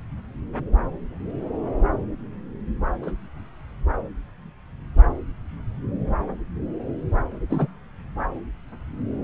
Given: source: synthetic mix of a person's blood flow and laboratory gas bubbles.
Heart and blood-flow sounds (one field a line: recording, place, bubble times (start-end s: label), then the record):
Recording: Doppler ultrasound of blood flow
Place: subclavian vein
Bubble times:
3.03-3.13 s: bubbles
7.50-7.67 s: bubbles
From the record:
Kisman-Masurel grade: 122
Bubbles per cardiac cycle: 1 to 2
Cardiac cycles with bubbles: 10 to 50%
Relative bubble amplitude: moderate (0.250 to 0.450)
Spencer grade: 2 (many but less than half of the cardiac periods contain bubble signals, singularly or in groups)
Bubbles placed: anywhere in the cardiac cycle